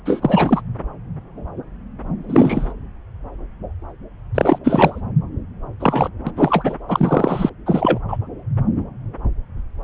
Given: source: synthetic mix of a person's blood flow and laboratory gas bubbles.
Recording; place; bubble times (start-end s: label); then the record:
Doppler ultrasound of blood flow; subclavian vein
0.06-0.61 s: bubbles
2.29-2.73 s: bubbles
4.34-4.58 s: bubbles
4.64-5.01 s: bubbles
5.79-6.09 s: bubbles
6.26-6.32 s: bubbles
6.37-6.75 s: bubbles
6.88-7.50 s: bubbles
7.66-7.99 s: bubbles
8.08-8.18 s: bubbles
From the record:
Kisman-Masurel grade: 223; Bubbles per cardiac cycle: several, 3 to 8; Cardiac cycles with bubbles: 10 to 50%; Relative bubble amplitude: loud (0.450 to 0.775); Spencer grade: 2 (many but less than half of the cardiac periods contain bubble signals, singularly or in groups); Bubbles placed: anywhere in the cardiac cycle